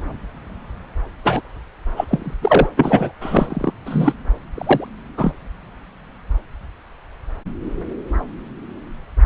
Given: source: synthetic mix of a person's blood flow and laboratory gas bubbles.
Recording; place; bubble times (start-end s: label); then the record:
Doppler ultrasound of blood flow; subclavian vein
1.24-1.41 s: bubbles
1.96-2.05 s: bubbles
2.08-2.34 s: bubbles
2.42-2.69 s: bubbles
2.76-3.13 s: bubbles
3.21-3.74 s: bubbles
3.86-4.13 s: bubbles
4.54-4.88 s: bubbles
5.17-5.33 s: bubbles
From the record:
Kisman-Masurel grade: 223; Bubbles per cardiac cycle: several, 3 to 8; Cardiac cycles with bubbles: 10 to 50%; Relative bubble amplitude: loud (0.450 to 0.775); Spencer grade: 2 (many but less than half of the cardiac periods contain bubble signals, singularly or in groups); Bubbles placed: anywhere in the cardiac cycle